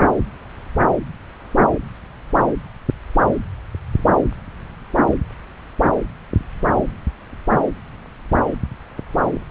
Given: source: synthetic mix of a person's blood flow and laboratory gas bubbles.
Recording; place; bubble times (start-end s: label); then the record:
Doppler ultrasound of blood flow; subclavian vein
no bubbles
From the record:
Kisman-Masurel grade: 000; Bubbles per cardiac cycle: 0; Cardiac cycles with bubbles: 0%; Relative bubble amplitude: no bubbles discernible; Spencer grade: 0 (complete lack of bubble signals)